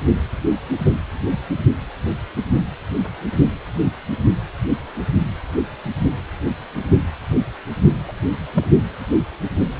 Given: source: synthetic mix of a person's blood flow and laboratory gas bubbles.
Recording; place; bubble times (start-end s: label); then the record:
Doppler ultrasound of blood flow; precordium
8.07-8.12 s: bubbles
8.54-8.64 s: bubbles
From the record:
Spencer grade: 1 (occasional bubble signal discernible with the cardiac motion signal, with majority of cardiac periods free of bubbles); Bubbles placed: only in the low amplitude regions of the cardiac cycle